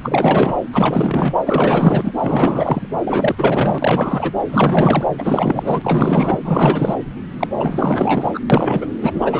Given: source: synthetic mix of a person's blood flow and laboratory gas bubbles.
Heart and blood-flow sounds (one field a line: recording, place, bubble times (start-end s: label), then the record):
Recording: Doppler ultrasound of blood flow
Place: subclavian vein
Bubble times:
0.03-0.53 s: bubbles
0.72-1.34 s: bubbles
1.46-2.12 s: bubbles
2.21-2.87 s: bubbles
3.04-3.35 s: bubbles
3.38-4.31 s: bubbles
4.47-5.07 s: bubbles
5.18-6.40 s: bubbles
6.44-6.95 s: bubbles
7.39-7.47 s: bubbles
7.58-8.40 s: bubbles
8.50-8.88 s: bubbles
8.99-9.40 s: bubbles
From the record:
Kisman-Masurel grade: 444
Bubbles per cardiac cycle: continuous sound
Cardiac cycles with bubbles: 100%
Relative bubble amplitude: maximal (0.775 to 0.999)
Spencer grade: 4 (maximum detectable bubble signal sounding continuously throughout systole and diastole of every cardiac period, and overriding the amplitude of the normal cardiac signals)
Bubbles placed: anywhere in the cardiac cycle